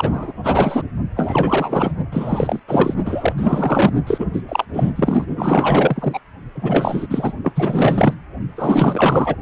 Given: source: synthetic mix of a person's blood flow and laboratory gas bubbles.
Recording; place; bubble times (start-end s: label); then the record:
Doppler ultrasound of blood flow; precordium
0.00-0.34 s: bubbles
0.43-0.83 s: bubbles
1.16-1.91 s: bubbles
2.12-2.60 s: bubbles
2.68-2.94 s: bubbles
3.04-3.34 s: bubbles
3.37-3.93 s: bubbles
4.07-4.26 s: bubbles
4.33-4.42 s: bubbles
4.48-4.65 s: bubbles
4.73-4.92 s: bubbles
4.96-5.25 s: bubbles
5.37-6.20 s: bubbles
6.54-7.07 s: bubbles
7.09-7.33 s: bubbles
7.42-7.52 s: bubbles
7.55-8.14 s: bubbles
8.56-9.36 s: bubbles
From the record:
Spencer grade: 4 (maximum detectable bubble signal sounding continuously throughout systole and diastole of every cardiac period, and overriding the amplitude of the normal cardiac signals); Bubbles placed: only in the low amplitude regions of the cardiac cycle